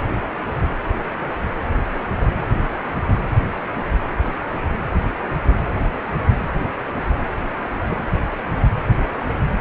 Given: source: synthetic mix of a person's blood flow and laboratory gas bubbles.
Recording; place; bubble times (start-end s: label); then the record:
Doppler ultrasound of blood flow; precordium
7.88-8.04 s: bubbles
From the record:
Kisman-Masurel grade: 111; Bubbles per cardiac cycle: 1 to 2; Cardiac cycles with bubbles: 1 to 10%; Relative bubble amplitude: barely perceptible (0.100 to 0.250); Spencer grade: 1 (occasional bubble signal discernible with the cardiac motion signal, with majority of cardiac periods free of bubbles); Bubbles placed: anywhere in the cardiac cycle